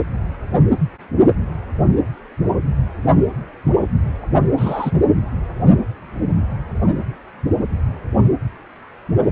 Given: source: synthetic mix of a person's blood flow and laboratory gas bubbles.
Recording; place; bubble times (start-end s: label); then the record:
Doppler ultrasound of blood flow; precordium
4.57-4.91 s: bubbles
From the record:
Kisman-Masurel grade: 113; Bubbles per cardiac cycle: 1 to 2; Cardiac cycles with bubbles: 1 to 10%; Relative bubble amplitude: loud (0.450 to 0.775); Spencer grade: 1 (occasional bubble signal discernible with the cardiac motion signal, with majority of cardiac periods free of bubbles); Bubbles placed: anywhere in the cardiac cycle